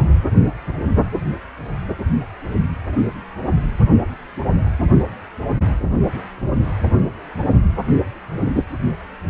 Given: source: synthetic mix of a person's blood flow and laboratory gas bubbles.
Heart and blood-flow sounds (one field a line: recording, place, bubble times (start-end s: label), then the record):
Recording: Doppler ultrasound of blood flow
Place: precordium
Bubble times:
no bubbles
From the record:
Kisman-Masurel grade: 000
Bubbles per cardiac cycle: 0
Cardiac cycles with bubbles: 0%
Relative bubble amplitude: no bubbles discernible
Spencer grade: 0 (complete lack of bubble signals)